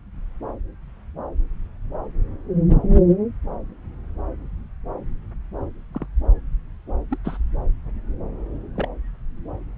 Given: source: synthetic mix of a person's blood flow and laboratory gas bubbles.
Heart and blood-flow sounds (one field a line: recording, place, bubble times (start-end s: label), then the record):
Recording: Doppler ultrasound of blood flow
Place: subclavian vein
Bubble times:
5.93-6.06 s: bubbles
7.10-7.17 s: bubbles
7.24-7.38 s: bubbles
8.76-8.88 s: bubbles
From the record:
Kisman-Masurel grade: 121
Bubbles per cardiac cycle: 1 to 2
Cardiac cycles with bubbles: 10 to 50%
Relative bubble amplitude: barely perceptible (0.100 to 0.250)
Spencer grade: 2 (many but less than half of the cardiac periods contain bubble signals, singularly or in groups)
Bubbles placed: anywhere in the cardiac cycle